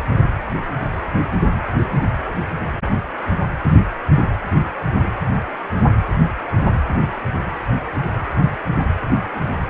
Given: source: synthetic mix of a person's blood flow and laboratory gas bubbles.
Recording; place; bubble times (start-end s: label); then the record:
Doppler ultrasound of blood flow; precordium
9.34-9.38 s: bubbles
From the record:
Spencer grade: 2 (many but less than half of the cardiac periods contain bubble signals, singularly or in groups); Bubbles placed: anywhere in the cardiac cycle